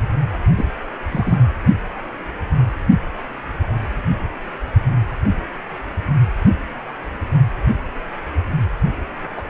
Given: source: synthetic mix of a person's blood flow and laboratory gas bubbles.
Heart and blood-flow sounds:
Doppler ultrasound of blood flow; precordium
0.57-0.65 s: bubbles
1.12-1.37 s: bubbles
9.37-9.41 s: bubbles
From the record:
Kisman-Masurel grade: 123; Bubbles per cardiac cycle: 1 to 2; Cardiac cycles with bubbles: 10 to 50%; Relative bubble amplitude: loud (0.450 to 0.775); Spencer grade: 2 (many but less than half of the cardiac periods contain bubble signals, singularly or in groups); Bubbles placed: only in the low amplitude regions of the cardiac cycle

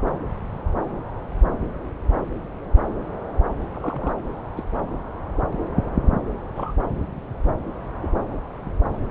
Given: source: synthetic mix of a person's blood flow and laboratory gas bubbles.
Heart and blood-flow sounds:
Doppler ultrasound of blood flow; subclavian vein
0.06-0.18 s: bubbles
3.73-4.13 s: bubbles
4.56-4.63 s: bubbles
6.55-6.73 s: bubbles
8.03-8.08 s: bubbles
8.91-8.98 s: bubbles
From the record:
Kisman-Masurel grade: 121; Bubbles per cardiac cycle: 1 to 2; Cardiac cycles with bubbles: 10 to 50%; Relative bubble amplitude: barely perceptible (0.100 to 0.250); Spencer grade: 2 (many but less than half of the cardiac periods contain bubble signals, singularly or in groups); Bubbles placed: anywhere in the cardiac cycle

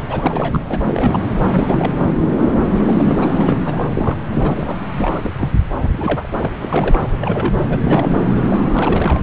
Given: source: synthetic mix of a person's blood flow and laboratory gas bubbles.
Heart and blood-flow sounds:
Doppler ultrasound of blood flow; subclavian vein
0.00-0.03 s: bubbles
0.09-0.58 s: bubbles
0.68-1.20 s: bubbles
1.48-1.94 s: bubbles
2.19-3.17 s: bubbles
3.21-3.59 s: bubbles
3.65-4.18 s: bubbles
4.29-4.81 s: bubbles
4.92-5.31 s: bubbles
5.38-5.49 s: bubbles
5.81-5.90 s: bubbles
5.92-6.29 s: bubbles
6.32-7.10 s: bubbles
7.21-7.79 s: bubbles
7.81-8.21 s: bubbles
8.48-9.21 s: bubbles
From the record:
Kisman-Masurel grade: 342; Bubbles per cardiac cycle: rolling drumbeat, 9 or more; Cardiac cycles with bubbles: 100%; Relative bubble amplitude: moderate (0.250 to 0.450); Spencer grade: 3 (all of the cardiac periods contain showers or single bubble signals, but not dominating or overriding the cardiac motion signals); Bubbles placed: anywhere in the cardiac cycle

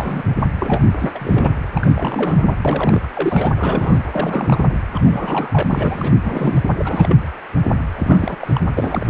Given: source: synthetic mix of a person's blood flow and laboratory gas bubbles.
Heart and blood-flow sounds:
Doppler ultrasound of blood flow; precordium
0.00-0.23 s: bubbles
0.27-0.35 s: bubbles
0.61-0.91 s: bubbles
0.99-1.11 s: bubbles
1.15-1.49 s: bubbles
1.74-2.55 s: bubbles
2.65-3.01 s: bubbles
3.04-3.07 s: bubbles
3.15-3.51 s: bubbles
3.58-4.02 s: bubbles
4.12-4.64 s: bubbles
4.94-5.00 s: bubbles
5.03-6.14 s: bubbles
6.23-6.61 s: bubbles
6.75-7.17 s: bubbles
7.95-8.37 s: bubbles
8.39-8.61 s: bubbles
8.77-9.07 s: bubbles
From the record:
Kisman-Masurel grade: 332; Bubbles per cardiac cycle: rolling drumbeat, 9 or more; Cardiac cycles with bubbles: 50 to 99%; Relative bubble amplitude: moderate (0.250 to 0.450); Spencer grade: 3 (all of the cardiac periods contain showers or single bubble signals, but not dominating or overriding the cardiac motion signals); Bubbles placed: anywhere in the cardiac cycle

